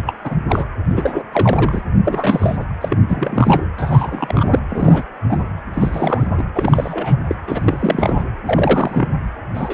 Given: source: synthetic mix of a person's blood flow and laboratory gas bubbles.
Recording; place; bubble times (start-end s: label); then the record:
Doppler ultrasound of blood flow; precordium
0.06-0.15 s: bubbles
0.24-0.35 s: bubbles
0.49-0.65 s: bubbles
0.90-1.23 s: bubbles
1.31-1.81 s: bubbles
2.05-2.64 s: bubbles
2.81-2.98 s: bubbles
3.08-3.63 s: bubbles
3.77-4.59 s: bubbles
4.70-5.03 s: bubbles
5.29-5.45 s: bubbles
5.72-6.27 s: bubbles
6.37-6.44 s: bubbles
6.55-7.19 s: bubbles
7.28-7.35 s: bubbles
7.46-8.23 s: bubbles
8.45-9.08 s: bubbles
9.54-9.74 s: bubbles
From the record:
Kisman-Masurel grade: 342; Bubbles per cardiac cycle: rolling drumbeat, 9 or more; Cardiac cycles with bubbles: 100%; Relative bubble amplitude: moderate (0.250 to 0.450); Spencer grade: 3 (all of the cardiac periods contain showers or single bubble signals, but not dominating or overriding the cardiac motion signals); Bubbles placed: anywhere in the cardiac cycle